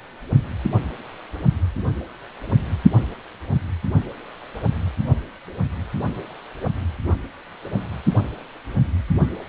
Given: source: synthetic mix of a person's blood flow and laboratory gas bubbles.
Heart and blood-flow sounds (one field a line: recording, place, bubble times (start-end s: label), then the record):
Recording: Doppler ultrasound of blood flow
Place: precordium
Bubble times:
no bubbles
From the record:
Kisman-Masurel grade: 000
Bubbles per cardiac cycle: 0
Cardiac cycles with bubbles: 0%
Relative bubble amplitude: no bubbles discernible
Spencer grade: 0 (complete lack of bubble signals)